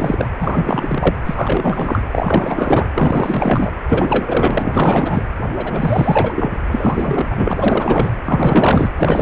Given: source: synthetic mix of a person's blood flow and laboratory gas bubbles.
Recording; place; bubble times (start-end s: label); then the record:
Doppler ultrasound of blood flow; precordium
0.00-0.29 s: bubbles
0.40-1.16 s: bubbles
1.26-2.04 s: bubbles
2.12-2.88 s: bubbles
2.94-3.71 s: bubbles
3.88-5.23 s: bubbles
5.57-6.52 s: bubbles
6.71-7.25 s: bubbles
7.30-8.11 s: bubbles
8.25-8.91 s: bubbles
8.96-9.21 s: bubbles
From the record:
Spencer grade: 4 (maximum detectable bubble signal sounding continuously throughout systole and diastole of every cardiac period, and overriding the amplitude of the normal cardiac signals); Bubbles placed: anywhere in the cardiac cycle